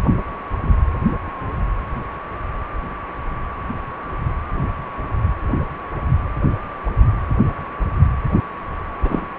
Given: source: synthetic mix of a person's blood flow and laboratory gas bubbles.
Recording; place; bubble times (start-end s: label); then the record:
Doppler ultrasound of blood flow; precordium
9.01-9.26 s: bubbles
From the record:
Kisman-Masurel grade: 122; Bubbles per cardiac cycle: 1 to 2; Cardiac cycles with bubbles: 10 to 50%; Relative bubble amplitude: moderate (0.250 to 0.450); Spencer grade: 2 (many but less than half of the cardiac periods contain bubble signals, singularly or in groups); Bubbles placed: anywhere in the cardiac cycle